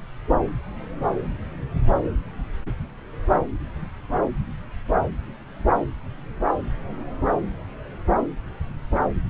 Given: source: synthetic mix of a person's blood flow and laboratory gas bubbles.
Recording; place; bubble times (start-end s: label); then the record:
Doppler ultrasound of blood flow; subclavian vein
no bubbles
From the record:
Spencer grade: 0 (complete lack of bubble signals)